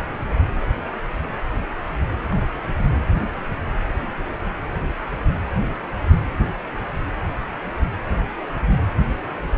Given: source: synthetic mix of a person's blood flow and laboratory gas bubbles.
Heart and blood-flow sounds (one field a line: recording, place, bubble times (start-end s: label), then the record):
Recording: Doppler ultrasound of blood flow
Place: precordium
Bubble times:
2.19-2.23 s: bubbles
2.32-2.44 s: bubbles
2.54-2.61 s: bubbles
2.77-2.85 s: bubbles
From the record:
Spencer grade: 1 (occasional bubble signal discernible with the cardiac motion signal, with majority of cardiac periods free of bubbles)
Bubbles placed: anywhere in the cardiac cycle